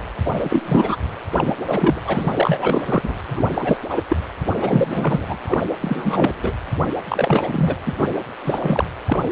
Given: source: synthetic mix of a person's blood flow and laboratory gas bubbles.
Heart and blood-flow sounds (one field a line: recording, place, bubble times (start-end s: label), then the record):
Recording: Doppler ultrasound of blood flow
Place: precordium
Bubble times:
0.25-0.97 s: bubbles
1.36-1.54 s: bubbles
1.68-2.00 s: bubbles
2.04-2.33 s: bubbles
2.36-2.83 s: bubbles
2.87-3.15 s: bubbles
3.28-3.45 s: bubbles
3.54-3.77 s: bubbles
3.89-4.02 s: bubbles
4.08-4.17 s: bubbles
4.57-5.25 s: bubbles
5.28-5.39 s: bubbles
5.45-5.67 s: bubbles
5.82-6.32 s: bubbles
6.42-6.54 s: bubbles
7.08-7.76 s: bubbles
7.85-7.94 s: bubbles
7.98-8.08 s: bubbles
8.44-8.84 s: bubbles
9.06-9.32 s: bubbles
From the record:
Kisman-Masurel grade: 343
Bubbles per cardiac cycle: rolling drumbeat, 9 or more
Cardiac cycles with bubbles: 100%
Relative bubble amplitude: loud (0.450 to 0.775)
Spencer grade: 3 (all of the cardiac periods contain showers or single bubble signals, but not dominating or overriding the cardiac motion signals)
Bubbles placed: anywhere in the cardiac cycle